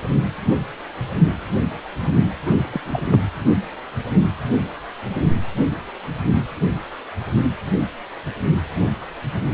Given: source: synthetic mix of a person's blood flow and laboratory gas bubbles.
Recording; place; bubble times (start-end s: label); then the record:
Doppler ultrasound of blood flow; precordium
2.42-2.64 s: bubbles
2.72-2.81 s: bubbles
2.85-3.03 s: bubbles
3.10-3.20 s: bubbles
From the record:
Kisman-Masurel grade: 212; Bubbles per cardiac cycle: several, 3 to 8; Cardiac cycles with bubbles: 1 to 10%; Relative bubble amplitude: moderate (0.250 to 0.450); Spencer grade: 1 (occasional bubble signal discernible with the cardiac motion signal, with majority of cardiac periods free of bubbles); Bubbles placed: anywhere in the cardiac cycle